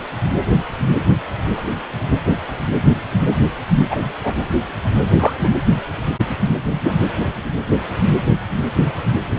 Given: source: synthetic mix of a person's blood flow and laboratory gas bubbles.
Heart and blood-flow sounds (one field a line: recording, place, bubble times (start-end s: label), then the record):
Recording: Doppler ultrasound of blood flow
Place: precordium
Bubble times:
3.21-3.33 s: bubbles
3.90-4.02 s: bubbles
4.23-4.33 s: bubbles
5.19-5.33 s: bubbles
5.44-5.49 s: bubbles
6.71-6.93 s: bubbles
From the record:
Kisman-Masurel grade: 123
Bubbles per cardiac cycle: 1 to 2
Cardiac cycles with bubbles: 10 to 50%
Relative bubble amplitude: loud (0.450 to 0.775)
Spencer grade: 2 (many but less than half of the cardiac periods contain bubble signals, singularly or in groups)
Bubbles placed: anywhere in the cardiac cycle